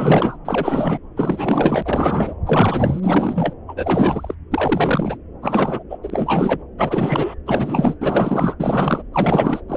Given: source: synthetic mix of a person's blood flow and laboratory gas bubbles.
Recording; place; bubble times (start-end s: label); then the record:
Doppler ultrasound of blood flow; subclavian vein
0.00-0.38 s: bubbles
0.45-0.98 s: bubbles
1.16-2.34 s: bubbles
2.46-3.54 s: bubbles
3.68-4.34 s: bubbles
4.51-5.17 s: bubbles
5.42-5.83 s: bubbles
5.89-5.98 s: bubbles
6.02-6.63 s: bubbles
6.77-7.34 s: bubbles
7.46-7.97 s: bubbles
8.00-8.57 s: bubbles
8.60-9.03 s: bubbles
9.13-9.62 s: bubbles
9.68-9.77 s: bubbles
From the record:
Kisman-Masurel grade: 444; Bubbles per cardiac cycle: continuous sound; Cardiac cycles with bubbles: 100%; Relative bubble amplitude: maximal (0.775 to 0.999); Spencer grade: 4 (maximum detectable bubble signal sounding continuously throughout systole and diastole of every cardiac period, and overriding the amplitude of the normal cardiac signals); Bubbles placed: anywhere in the cardiac cycle